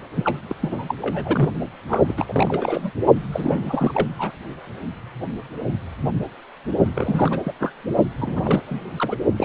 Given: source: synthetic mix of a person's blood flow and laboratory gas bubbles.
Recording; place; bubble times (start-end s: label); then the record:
Doppler ultrasound of blood flow; precordium
0.15-0.39 s: bubbles
0.49-0.54 s: bubbles
0.61-0.94 s: bubbles
1.02-1.50 s: bubbles
1.88-2.02 s: bubbles
2.08-2.91 s: bubbles
3.32-4.08 s: bubbles
4.19-4.32 s: bubbles
6.94-7.40 s: bubbles
7.45-7.52 s: bubbles
7.59-7.72 s: bubbles
8.18-8.61 s: bubbles
8.66-8.91 s: bubbles
8.97-9.16 s: bubbles
9.37-9.45 s: bubbles
From the record:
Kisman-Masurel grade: 332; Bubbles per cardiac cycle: rolling drumbeat, 9 or more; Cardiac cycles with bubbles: 50 to 99%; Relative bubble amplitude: moderate (0.250 to 0.450); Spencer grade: 3 (all of the cardiac periods contain showers or single bubble signals, but not dominating or overriding the cardiac motion signals); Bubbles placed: only in the low amplitude regions of the cardiac cycle